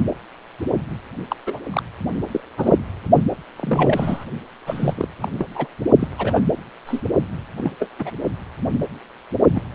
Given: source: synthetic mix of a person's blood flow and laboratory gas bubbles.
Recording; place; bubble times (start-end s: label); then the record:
Doppler ultrasound of blood flow; precordium
1.29-1.35 s: bubbles
1.46-1.59 s: bubbles
1.70-1.82 s: bubbles
2.31-2.41 s: bubbles
2.58-2.78 s: bubbles
3.56-4.25 s: bubbles
4.67-5.07 s: bubbles
5.21-5.29 s: bubbles
5.38-5.46 s: bubbles
5.55-5.67 s: bubbles
5.99-6.07 s: bubbles
6.17-6.41 s: bubbles
6.86-7.01 s: bubbles
7.57-7.71 s: bubbles
7.79-7.88 s: bubbles
7.98-8.11 s: bubbles
9.54-9.61 s: bubbles
From the record:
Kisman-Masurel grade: 232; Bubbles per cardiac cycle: several, 3 to 8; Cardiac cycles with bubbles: 50 to 99%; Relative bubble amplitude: moderate (0.250 to 0.450); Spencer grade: 3 (all of the cardiac periods contain showers or single bubble signals, but not dominating or overriding the cardiac motion signals); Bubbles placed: only in the low amplitude regions of the cardiac cycle